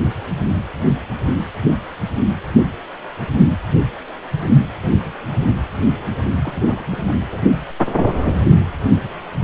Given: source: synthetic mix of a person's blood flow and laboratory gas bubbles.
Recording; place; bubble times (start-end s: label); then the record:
Doppler ultrasound of blood flow; precordium
6.40-6.62 s: bubbles
6.67-6.85 s: bubbles
6.91-7.17 s: bubbles
7.32-7.42 s: bubbles
From the record:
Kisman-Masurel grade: 211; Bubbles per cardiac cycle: several, 3 to 8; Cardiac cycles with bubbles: 1 to 10%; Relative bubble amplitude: barely perceptible (0.100 to 0.250); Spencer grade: 1 (occasional bubble signal discernible with the cardiac motion signal, with majority of cardiac periods free of bubbles); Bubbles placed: anywhere in the cardiac cycle